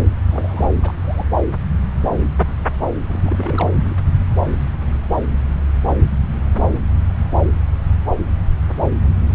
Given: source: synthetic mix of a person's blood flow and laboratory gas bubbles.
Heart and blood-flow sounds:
Doppler ultrasound of blood flow; subclavian vein
0.30-0.73 s: bubbles
0.82-0.93 s: bubbles
1.03-1.24 s: bubbles
3.09-3.19 s: bubbles
3.24-3.69 s: bubbles
3.73-3.99 s: bubbles
From the record:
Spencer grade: 2 (many but less than half of the cardiac periods contain bubble signals, singularly or in groups); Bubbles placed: anywhere in the cardiac cycle

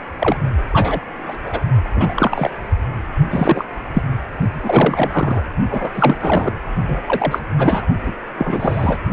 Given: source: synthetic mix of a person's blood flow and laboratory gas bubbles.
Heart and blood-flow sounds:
Doppler ultrasound of blood flow; precordium
0.18-0.37 s: bubbles
0.73-1.00 s: bubbles
1.28-1.37 s: bubbles
1.45-1.60 s: bubbles
1.95-2.50 s: bubbles
3.30-3.65 s: bubbles
3.94-4.04 s: bubbles
4.54-5.43 s: bubbles
5.70-5.90 s: bubbles
5.95-6.53 s: bubbles
6.88-7.01 s: bubbles
7.06-7.39 s: bubbles
7.58-7.86 s: bubbles
8.05-8.13 s: bubbles
8.38-8.97 s: bubbles
From the record:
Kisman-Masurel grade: 233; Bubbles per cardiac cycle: several, 3 to 8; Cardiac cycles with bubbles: 50 to 99%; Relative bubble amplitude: loud (0.450 to 0.775); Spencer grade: 3 (all of the cardiac periods contain showers or single bubble signals, but not dominating or overriding the cardiac motion signals); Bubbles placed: only in the low amplitude regions of the cardiac cycle

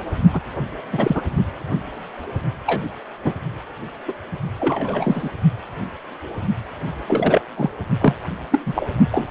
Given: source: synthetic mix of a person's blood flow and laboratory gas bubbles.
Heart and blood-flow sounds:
Doppler ultrasound of blood flow; precordium
0.34-0.41 s: bubbles
0.92-1.22 s: bubbles
2.66-2.83 s: bubbles
3.24-3.33 s: bubbles
4.08-4.13 s: bubbles
4.59-5.30 s: bubbles
7.08-7.42 s: bubbles
7.58-7.70 s: bubbles
8.01-8.15 s: bubbles
8.52-8.61 s: bubbles
8.66-8.87 s: bubbles
9.12-9.31 s: bubbles
From the record:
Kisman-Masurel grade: 233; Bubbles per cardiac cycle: several, 3 to 8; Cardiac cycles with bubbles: 50 to 99%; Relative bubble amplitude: loud (0.450 to 0.775); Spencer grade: 3 (all of the cardiac periods contain showers or single bubble signals, but not dominating or overriding the cardiac motion signals); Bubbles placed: only in the low amplitude regions of the cardiac cycle

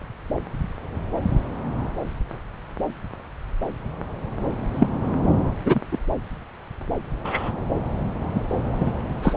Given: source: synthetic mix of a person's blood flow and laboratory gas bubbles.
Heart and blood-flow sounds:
Doppler ultrasound of blood flow; subclavian vein
4.74-4.87 s: bubbles
5.64-5.80 s: bubbles
5.92-5.98 s: bubbles
7.24-7.51 s: bubbles
8.34-8.40 s: bubbles
8.79-8.91 s: bubbles
9.22-9.36 s: bubbles
From the record:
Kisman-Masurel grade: 123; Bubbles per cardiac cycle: 1 to 2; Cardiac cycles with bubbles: 10 to 50%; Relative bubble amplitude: loud (0.450 to 0.775); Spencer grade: 2 (many but less than half of the cardiac periods contain bubble signals, singularly or in groups); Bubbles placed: anywhere in the cardiac cycle

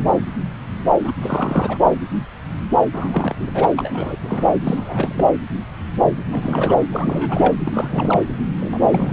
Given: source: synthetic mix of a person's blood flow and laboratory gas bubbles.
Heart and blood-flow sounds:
Doppler ultrasound of blood flow; subclavian vein
1.04-1.12 s: bubbles
1.21-1.77 s: bubbles
2.93-3.35 s: bubbles
3.40-3.50 s: bubbles
3.54-3.68 s: bubbles
3.76-4.16 s: bubbles
4.21-4.53 s: bubbles
4.64-5.32 s: bubbles
6.30-6.82 s: bubbles
6.92-7.54 s: bubbles
7.65-8.22 s: bubbles
8.60-8.78 s: bubbles
8.92-9.13 s: bubbles
From the record:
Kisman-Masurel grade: 332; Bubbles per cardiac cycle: rolling drumbeat, 9 or more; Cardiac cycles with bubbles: 50 to 99%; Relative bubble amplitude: moderate (0.250 to 0.450); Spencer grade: 3 (all of the cardiac periods contain showers or single bubble signals, but not dominating or overriding the cardiac motion signals); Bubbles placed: anywhere in the cardiac cycle

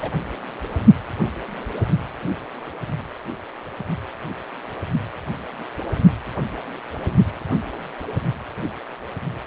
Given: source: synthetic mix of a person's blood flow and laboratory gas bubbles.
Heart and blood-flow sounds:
Doppler ultrasound of blood flow; precordium
0.00-0.11 s: bubbles
From the record:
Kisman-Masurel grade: 111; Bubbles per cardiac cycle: 1 to 2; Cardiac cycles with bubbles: 1 to 10%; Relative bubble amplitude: barely perceptible (0.100 to 0.250); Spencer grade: 1 (occasional bubble signal discernible with the cardiac motion signal, with majority of cardiac periods free of bubbles); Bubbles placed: only in the low amplitude regions of the cardiac cycle

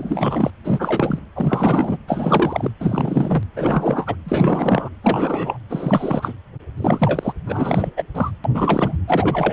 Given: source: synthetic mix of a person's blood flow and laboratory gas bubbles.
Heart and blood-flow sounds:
Doppler ultrasound of blood flow; precordium
0.00-0.51 s: bubbles
0.64-1.19 s: bubbles
1.34-1.98 s: bubbles
2.08-2.71 s: bubbles
2.79-3.43 s: bubbles
3.56-4.16 s: bubbles
4.25-4.89 s: bubbles
5.03-5.58 s: bubbles
5.70-6.33 s: bubbles
6.76-7.33 s: bubbles
7.46-7.91 s: bubbles
7.97-8.02 s: bubbles
8.14-8.31 s: bubbles
8.44-8.98 s: bubbles
9.07-9.53 s: bubbles
From the record:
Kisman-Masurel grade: 343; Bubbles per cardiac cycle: rolling drumbeat, 9 or more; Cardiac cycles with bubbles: 100%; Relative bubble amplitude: loud (0.450 to 0.775); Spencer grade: 3 (all of the cardiac periods contain showers or single bubble signals, but not dominating or overriding the cardiac motion signals); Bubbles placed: anywhere in the cardiac cycle

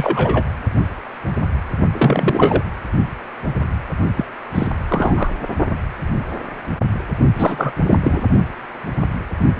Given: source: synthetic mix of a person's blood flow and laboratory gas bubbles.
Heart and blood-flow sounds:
Doppler ultrasound of blood flow; precordium
0.00-0.44 s: bubbles
1.93-2.63 s: bubbles
4.16-4.25 s: bubbles
4.55-4.68 s: bubbles
4.89-5.33 s: bubbles
7.35-7.73 s: bubbles
7.83-7.98 s: bubbles
8.02-8.23 s: bubbles
From the record:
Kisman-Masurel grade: 233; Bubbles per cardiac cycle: several, 3 to 8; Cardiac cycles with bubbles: 50 to 99%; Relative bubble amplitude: loud (0.450 to 0.775); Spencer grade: 3 (all of the cardiac periods contain showers or single bubble signals, but not dominating or overriding the cardiac motion signals); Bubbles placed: only in the low amplitude regions of the cardiac cycle

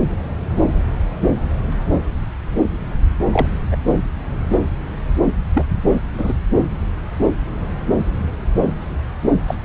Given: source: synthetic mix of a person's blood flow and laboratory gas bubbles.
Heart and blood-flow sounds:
Doppler ultrasound of blood flow; subclavian vein
3.31-3.46 s: bubbles
3.71-3.76 s: bubbles
5.54-5.65 s: bubbles
6.13-6.33 s: bubbles
9.47-9.55 s: bubbles
From the record:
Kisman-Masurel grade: 122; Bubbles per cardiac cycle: 1 to 2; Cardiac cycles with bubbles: 10 to 50%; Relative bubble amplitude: moderate (0.250 to 0.450); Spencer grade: 2 (many but less than half of the cardiac periods contain bubble signals, singularly or in groups); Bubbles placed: anywhere in the cardiac cycle

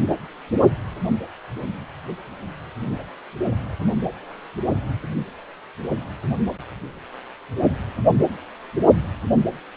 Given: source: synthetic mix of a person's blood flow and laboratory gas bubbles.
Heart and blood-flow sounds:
Doppler ultrasound of blood flow; precordium
no bubbles
From the record:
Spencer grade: 0 (complete lack of bubble signals)

